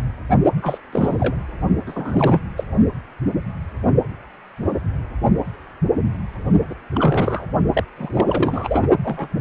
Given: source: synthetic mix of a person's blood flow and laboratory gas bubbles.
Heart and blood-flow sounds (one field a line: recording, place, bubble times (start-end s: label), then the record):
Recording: Doppler ultrasound of blood flow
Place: precordium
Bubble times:
0.61-0.78 s: bubbles
0.92-1.36 s: bubbles
1.86-2.40 s: bubbles
2.56-2.65 s: bubbles
6.69-6.75 s: bubbles
6.94-7.46 s: bubbles
7.73-7.84 s: bubbles
7.95-8.87 s: bubbles
9.04-9.28 s: bubbles
From the record:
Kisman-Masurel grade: 332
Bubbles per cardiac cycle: rolling drumbeat, 9 or more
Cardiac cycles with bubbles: 50 to 99%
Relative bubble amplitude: moderate (0.250 to 0.450)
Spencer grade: 3 (all of the cardiac periods contain showers or single bubble signals, but not dominating or overriding the cardiac motion signals)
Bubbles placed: only in the low amplitude regions of the cardiac cycle